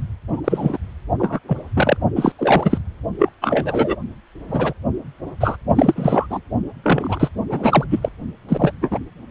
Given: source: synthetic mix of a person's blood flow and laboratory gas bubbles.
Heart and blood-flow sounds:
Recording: Doppler ultrasound of blood flow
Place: precordium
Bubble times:
0.28-0.41 s: bubbles
0.44-0.77 s: bubbles
1.19-1.39 s: bubbles
1.48-1.57 s: bubbles
1.75-1.97 s: bubbles
2.15-2.32 s: bubbles
2.38-2.78 s: bubbles
3.19-3.29 s: bubbles
3.42-3.95 s: bubbles
4.48-4.73 s: bubbles
5.40-5.57 s: bubbles
5.75-6.27 s: bubbles
6.29-6.41 s: bubbles
6.83-7.29 s: bubbles
7.49-7.85 s: bubbles
7.90-8.09 s: bubbles
8.49-8.71 s: bubbles
8.81-8.99 s: bubbles
From the record:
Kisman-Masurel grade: 243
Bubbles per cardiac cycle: several, 3 to 8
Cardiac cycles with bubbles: 100%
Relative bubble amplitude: loud (0.450 to 0.775)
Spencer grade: 3 (all of the cardiac periods contain showers or single bubble signals, but not dominating or overriding the cardiac motion signals)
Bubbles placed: only in the low amplitude regions of the cardiac cycle

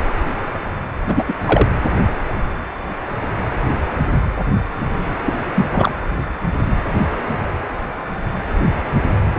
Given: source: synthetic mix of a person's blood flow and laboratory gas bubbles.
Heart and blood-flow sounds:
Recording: Doppler ultrasound of blood flow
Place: precordium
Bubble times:
1.07-1.24 s: bubbles
1.28-1.33 s: bubbles
1.46-1.67 s: bubbles
5.26-5.33 s: bubbles
5.54-5.66 s: bubbles
5.72-5.91 s: bubbles
From the record:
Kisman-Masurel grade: 223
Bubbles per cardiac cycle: several, 3 to 8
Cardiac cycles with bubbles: 10 to 50%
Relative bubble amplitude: loud (0.450 to 0.775)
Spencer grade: 2 (many but less than half of the cardiac periods contain bubble signals, singularly or in groups)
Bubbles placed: anywhere in the cardiac cycle

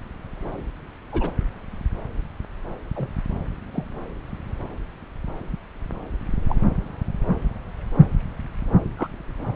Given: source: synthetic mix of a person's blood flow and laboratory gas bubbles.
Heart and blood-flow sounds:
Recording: Doppler ultrasound of blood flow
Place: subclavian vein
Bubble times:
1.12-1.31 s: bubbles
2.95-3.09 s: bubbles
3.73-3.84 s: bubbles
6.47-6.55 s: bubbles
8.97-9.08 s: bubbles
From the record:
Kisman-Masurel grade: 121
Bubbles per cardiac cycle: 1 to 2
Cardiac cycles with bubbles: 10 to 50%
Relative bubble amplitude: barely perceptible (0.100 to 0.250)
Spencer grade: 2 (many but less than half of the cardiac periods contain bubble signals, singularly or in groups)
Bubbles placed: anywhere in the cardiac cycle

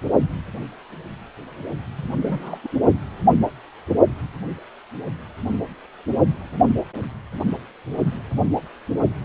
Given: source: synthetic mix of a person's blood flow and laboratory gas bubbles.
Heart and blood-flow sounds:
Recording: Doppler ultrasound of blood flow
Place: precordium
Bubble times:
1.97-2.04 s: bubbles
2.20-2.59 s: bubbles
2.63-2.68 s: bubbles
From the record:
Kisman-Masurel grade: 211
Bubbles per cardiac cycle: several, 3 to 8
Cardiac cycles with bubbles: 1 to 10%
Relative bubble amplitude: barely perceptible (0.100 to 0.250)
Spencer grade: 1 (occasional bubble signal discernible with the cardiac motion signal, with majority of cardiac periods free of bubbles)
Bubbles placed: only in the low amplitude regions of the cardiac cycle

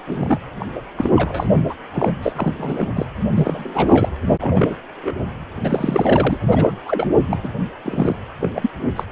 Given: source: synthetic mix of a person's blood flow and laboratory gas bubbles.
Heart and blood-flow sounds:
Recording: Doppler ultrasound of blood flow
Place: precordium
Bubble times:
0.07-0.40 s: bubbles
0.59-0.81 s: bubbles
0.98-1.10 s: bubbles
1.16-1.62 s: bubbles
1.69-1.75 s: bubbles
1.93-2.12 s: bubbles
2.22-2.33 s: bubbles
2.37-2.87 s: bubbles
2.96-3.06 s: bubbles
3.15-3.20 s: bubbles
3.34-4.09 s: bubbles
4.26-4.36 s: bubbles
4.40-4.75 s: bubbles
5.01-5.13 s: bubbles
5.63-6.38 s: bubbles
6.48-6.71 s: bubbles
6.85-7.06 s: bubbles
7.21-7.54 s: bubbles
7.84-8.15 s: bubbles
8.40-8.50 s: bubbles
8.54-8.70 s: bubbles
8.96-9.04 s: bubbles
From the record:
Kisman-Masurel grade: 342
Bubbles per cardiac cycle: rolling drumbeat, 9 or more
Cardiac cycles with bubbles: 100%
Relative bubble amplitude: moderate (0.250 to 0.450)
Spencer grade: 3 (all of the cardiac periods contain showers or single bubble signals, but not dominating or overriding the cardiac motion signals)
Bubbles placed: anywhere in the cardiac cycle

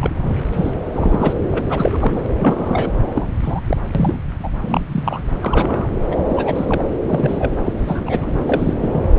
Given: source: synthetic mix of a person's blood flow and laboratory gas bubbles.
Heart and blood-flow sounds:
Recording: Doppler ultrasound of blood flow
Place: subclavian vein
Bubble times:
0.00-0.43 s: bubbles
0.52-0.73 s: bubbles
0.92-1.33 s: bubbles
1.51-2.29 s: bubbles
2.40-2.90 s: bubbles
3.15-3.28 s: bubbles
3.42-3.61 s: bubbles
3.67-3.77 s: bubbles
3.94-4.17 s: bubbles
4.43-4.50 s: bubbles
4.61-4.83 s: bubbles
4.92-5.21 s: bubbles
5.42-5.88 s: bubbles
6.10-6.25 s: bubbles
6.28-6.82 s: bubbles
7.03-7.53 s: bubbles
7.65-7.73 s: bubbles
7.79-8.02 s: bubbles
8.06-8.33 s: bubbles
8.49-8.73 s: bubbles
8.81-9.02 s: bubbles
From the record:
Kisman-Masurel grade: 243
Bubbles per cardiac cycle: several, 3 to 8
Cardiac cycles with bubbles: 100%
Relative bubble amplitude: loud (0.450 to 0.775)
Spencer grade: 3 (all of the cardiac periods contain showers or single bubble signals, but not dominating or overriding the cardiac motion signals)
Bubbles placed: anywhere in the cardiac cycle

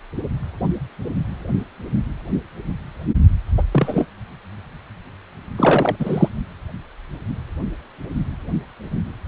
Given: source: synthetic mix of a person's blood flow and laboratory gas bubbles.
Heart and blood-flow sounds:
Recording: Doppler ultrasound of blood flow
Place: precordium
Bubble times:
3.57-3.62 s: bubbles
3.71-4.06 s: bubbles
5.58-5.96 s: bubbles
6.00-6.29 s: bubbles
From the record:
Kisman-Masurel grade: 223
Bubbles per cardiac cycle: several, 3 to 8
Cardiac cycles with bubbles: 10 to 50%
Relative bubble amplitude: loud (0.450 to 0.775)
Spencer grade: 2 (many but less than half of the cardiac periods contain bubble signals, singularly or in groups)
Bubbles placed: only in the low amplitude regions of the cardiac cycle

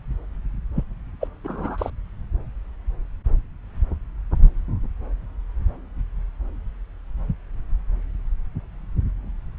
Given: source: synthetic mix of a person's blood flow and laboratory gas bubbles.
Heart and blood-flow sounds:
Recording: Doppler ultrasound of blood flow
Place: subclavian vein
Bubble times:
0.75-0.83 s: bubbles
1.21-1.27 s: bubbles
1.44-1.90 s: bubbles
From the record:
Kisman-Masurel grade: 222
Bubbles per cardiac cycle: several, 3 to 8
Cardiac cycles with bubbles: 10 to 50%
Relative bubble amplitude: moderate (0.250 to 0.450)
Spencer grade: 2 (many but less than half of the cardiac periods contain bubble signals, singularly or in groups)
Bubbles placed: anywhere in the cardiac cycle

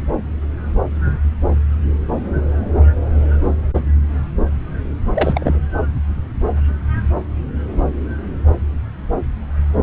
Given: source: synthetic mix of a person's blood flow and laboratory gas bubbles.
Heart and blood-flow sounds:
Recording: Doppler ultrasound of blood flow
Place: subclavian vein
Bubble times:
5.15-5.59 s: bubbles
From the record:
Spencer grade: 1 (occasional bubble signal discernible with the cardiac motion signal, with majority of cardiac periods free of bubbles)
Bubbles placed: anywhere in the cardiac cycle

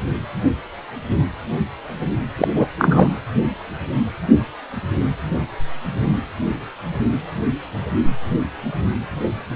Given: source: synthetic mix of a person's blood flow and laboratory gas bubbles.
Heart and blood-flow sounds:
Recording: Doppler ultrasound of blood flow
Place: precordium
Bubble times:
2.38-2.48 s: bubbles
2.54-2.66 s: bubbles
2.78-3.13 s: bubbles
From the record:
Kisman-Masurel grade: 213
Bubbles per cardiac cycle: several, 3 to 8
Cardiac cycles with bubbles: 1 to 10%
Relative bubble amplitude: loud (0.450 to 0.775)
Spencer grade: 1 (occasional bubble signal discernible with the cardiac motion signal, with majority of cardiac periods free of bubbles)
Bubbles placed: anywhere in the cardiac cycle

